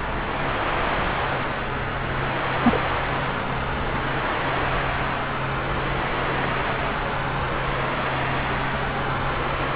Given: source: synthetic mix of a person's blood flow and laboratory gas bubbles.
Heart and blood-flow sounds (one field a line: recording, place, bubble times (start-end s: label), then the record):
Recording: Doppler ultrasound of blood flow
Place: subclavian vein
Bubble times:
2.62-2.79 s: bubbles
From the record:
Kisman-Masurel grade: 112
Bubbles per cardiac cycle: 1 to 2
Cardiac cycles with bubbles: 1 to 10%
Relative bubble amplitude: moderate (0.250 to 0.450)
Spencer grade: 1 (occasional bubble signal discernible with the cardiac motion signal, with majority of cardiac periods free of bubbles)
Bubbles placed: anywhere in the cardiac cycle